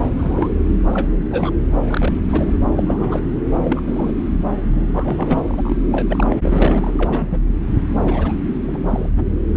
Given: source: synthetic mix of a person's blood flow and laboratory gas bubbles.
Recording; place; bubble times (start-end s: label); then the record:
Doppler ultrasound of blood flow; subclavian vein
0.17-0.49 s: bubbles
0.93-1.08 s: bubbles
1.31-1.53 s: bubbles
1.87-2.19 s: bubbles
2.23-2.52 s: bubbles
2.76-2.83 s: bubbles
2.87-3.21 s: bubbles
3.63-3.81 s: bubbles
3.86-4.12 s: bubbles
4.94-5.82 s: bubbles
5.92-6.36 s: bubbles
6.43-6.93 s: bubbles
6.98-7.40 s: bubbles
8.04-8.34 s: bubbles
8.64-8.79 s: bubbles
8.87-9.09 s: bubbles
9.17-9.23 s: bubbles
9.54-9.56 s: bubbles
From the record:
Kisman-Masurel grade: 232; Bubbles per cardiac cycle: several, 3 to 8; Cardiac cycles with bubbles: 50 to 99%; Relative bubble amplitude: moderate (0.250 to 0.450); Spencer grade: 3 (all of the cardiac periods contain showers or single bubble signals, but not dominating or overriding the cardiac motion signals); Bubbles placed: anywhere in the cardiac cycle